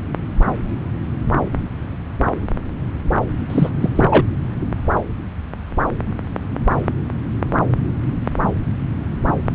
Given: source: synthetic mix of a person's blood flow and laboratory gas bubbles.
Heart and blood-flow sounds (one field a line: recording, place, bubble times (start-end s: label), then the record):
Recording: Doppler ultrasound of blood flow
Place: subclavian vein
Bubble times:
3.50-3.69 s: bubbles
3.81-3.90 s: bubbles
3.95-4.25 s: bubbles
From the record:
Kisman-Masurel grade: 213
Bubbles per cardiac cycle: several, 3 to 8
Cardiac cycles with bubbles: 1 to 10%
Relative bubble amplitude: loud (0.450 to 0.775)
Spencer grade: 1 (occasional bubble signal discernible with the cardiac motion signal, with majority of cardiac periods free of bubbles)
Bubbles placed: anywhere in the cardiac cycle